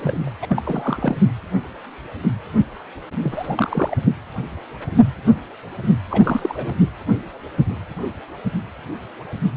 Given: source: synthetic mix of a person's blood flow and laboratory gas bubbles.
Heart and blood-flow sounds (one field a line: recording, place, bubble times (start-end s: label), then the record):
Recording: Doppler ultrasound of blood flow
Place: precordium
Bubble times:
0.00-0.31 s: bubbles
0.41-1.17 s: bubbles
3.22-3.96 s: bubbles
6.10-6.79 s: bubbles
From the record:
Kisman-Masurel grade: 222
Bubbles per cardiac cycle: several, 3 to 8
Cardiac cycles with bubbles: 10 to 50%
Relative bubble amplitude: moderate (0.250 to 0.450)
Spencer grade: 2 (many but less than half of the cardiac periods contain bubble signals, singularly or in groups)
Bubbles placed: anywhere in the cardiac cycle